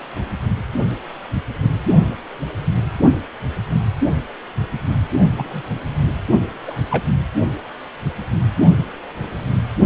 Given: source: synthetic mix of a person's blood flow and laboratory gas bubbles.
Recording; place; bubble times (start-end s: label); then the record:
Doppler ultrasound of blood flow; precordium
5.37-5.62 s: bubbles
6.67-6.73 s: bubbles
6.91-7.04 s: bubbles
From the record:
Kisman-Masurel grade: 122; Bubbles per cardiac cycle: 1 to 2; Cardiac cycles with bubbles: 10 to 50%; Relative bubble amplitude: moderate (0.250 to 0.450); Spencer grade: 2 (many but less than half of the cardiac periods contain bubble signals, singularly or in groups); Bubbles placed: only in the low amplitude regions of the cardiac cycle